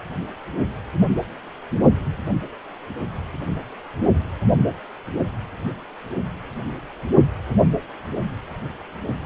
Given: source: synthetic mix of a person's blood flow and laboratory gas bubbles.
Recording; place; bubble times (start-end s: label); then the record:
Doppler ultrasound of blood flow; precordium
no bubbles
From the record:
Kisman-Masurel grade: 000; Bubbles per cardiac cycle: 0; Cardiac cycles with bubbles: 0%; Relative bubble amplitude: no bubbles discernible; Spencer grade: 0 (complete lack of bubble signals)